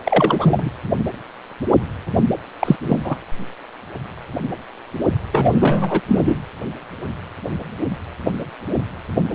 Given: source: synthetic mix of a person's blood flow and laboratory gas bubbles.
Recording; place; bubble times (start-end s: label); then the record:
Doppler ultrasound of blood flow; precordium
0.05-0.71 s: bubbles
2.60-2.76 s: bubbles
2.83-3.16 s: bubbles
5.32-6.00 s: bubbles
6.07-6.35 s: bubbles
From the record:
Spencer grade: 2 (many but less than half of the cardiac periods contain bubble signals, singularly or in groups); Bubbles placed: anywhere in the cardiac cycle